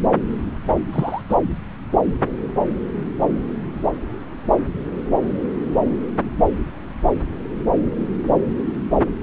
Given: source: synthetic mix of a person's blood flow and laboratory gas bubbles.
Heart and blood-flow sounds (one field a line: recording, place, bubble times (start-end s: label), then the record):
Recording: Doppler ultrasound of blood flow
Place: subclavian vein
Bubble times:
0.92-1.21 s: bubbles
1.29-1.35 s: bubbles
From the record:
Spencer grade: 1 (occasional bubble signal discernible with the cardiac motion signal, with majority of cardiac periods free of bubbles)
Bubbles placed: anywhere in the cardiac cycle